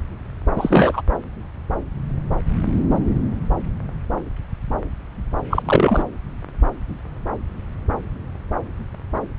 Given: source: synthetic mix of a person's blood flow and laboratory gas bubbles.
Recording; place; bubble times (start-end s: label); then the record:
Doppler ultrasound of blood flow; subclavian vein
0.56-1.02 s: bubbles
5.50-5.62 s: bubbles
5.65-6.04 s: bubbles
From the record:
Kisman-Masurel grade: 213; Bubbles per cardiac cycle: several, 3 to 8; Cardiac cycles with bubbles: 1 to 10%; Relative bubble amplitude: loud (0.450 to 0.775); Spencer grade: 1 (occasional bubble signal discernible with the cardiac motion signal, with majority of cardiac periods free of bubbles); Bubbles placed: anywhere in the cardiac cycle